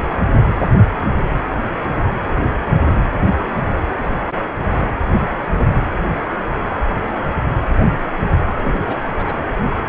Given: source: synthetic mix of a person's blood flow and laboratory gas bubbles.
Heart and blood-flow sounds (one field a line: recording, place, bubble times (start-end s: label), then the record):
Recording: Doppler ultrasound of blood flow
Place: precordium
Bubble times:
8.58-8.80 s: bubbles
8.87-9.02 s: bubbles
9.13-9.39 s: bubbles
From the record:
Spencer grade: 1 (occasional bubble signal discernible with the cardiac motion signal, with majority of cardiac periods free of bubbles)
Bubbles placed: anywhere in the cardiac cycle